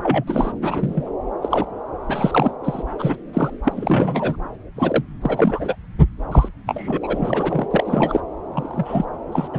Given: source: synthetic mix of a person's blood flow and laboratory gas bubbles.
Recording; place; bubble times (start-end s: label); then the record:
Doppler ultrasound of blood flow; subclavian vein
0.02-0.24 s: bubbles
0.27-0.52 s: bubbles
0.61-1.11 s: bubbles
1.42-1.65 s: bubbles
2.08-2.51 s: bubbles
2.64-2.83 s: bubbles
2.99-3.16 s: bubbles
3.33-3.50 s: bubbles
3.64-4.35 s: bubbles
4.75-5.03 s: bubbles
5.21-5.75 s: bubbles
6.31-6.48 s: bubbles
6.66-6.98 s: bubbles
7.01-7.67 s: bubbles
7.71-8.20 s: bubbles
8.54-9.05 s: bubbles
9.32-9.48 s: bubbles
9.53-9.59 s: bubbles
From the record:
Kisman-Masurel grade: 242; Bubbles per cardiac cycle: several, 3 to 8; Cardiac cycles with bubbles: 100%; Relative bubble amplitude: moderate (0.250 to 0.450); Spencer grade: 3 (all of the cardiac periods contain showers or single bubble signals, but not dominating or overriding the cardiac motion signals); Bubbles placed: anywhere in the cardiac cycle